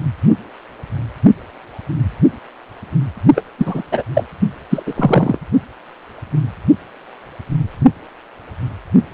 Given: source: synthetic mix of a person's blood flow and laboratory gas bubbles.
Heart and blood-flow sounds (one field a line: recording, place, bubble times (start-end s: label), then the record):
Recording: Doppler ultrasound of blood flow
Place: precordium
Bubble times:
3.35-3.42 s: bubbles
3.58-3.83 s: bubbles
3.92-4.03 s: bubbles
4.14-4.24 s: bubbles
4.70-4.83 s: bubbles
4.86-4.93 s: bubbles
4.96-5.38 s: bubbles
From the record:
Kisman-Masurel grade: 223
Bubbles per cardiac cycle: several, 3 to 8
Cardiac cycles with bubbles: 10 to 50%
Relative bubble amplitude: loud (0.450 to 0.775)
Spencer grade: 2 (many but less than half of the cardiac periods contain bubble signals, singularly or in groups)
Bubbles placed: only in the low amplitude regions of the cardiac cycle